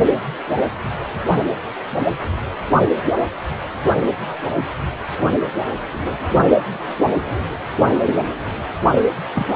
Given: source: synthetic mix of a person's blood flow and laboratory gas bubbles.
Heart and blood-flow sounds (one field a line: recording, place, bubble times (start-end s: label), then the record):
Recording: Doppler ultrasound of blood flow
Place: precordium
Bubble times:
9.35-9.47 s: bubbles
From the record:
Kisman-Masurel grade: 212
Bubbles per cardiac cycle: several, 3 to 8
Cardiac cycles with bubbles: 1 to 10%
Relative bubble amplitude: moderate (0.250 to 0.450)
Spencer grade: 1 (occasional bubble signal discernible with the cardiac motion signal, with majority of cardiac periods free of bubbles)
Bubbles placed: only in the low amplitude regions of the cardiac cycle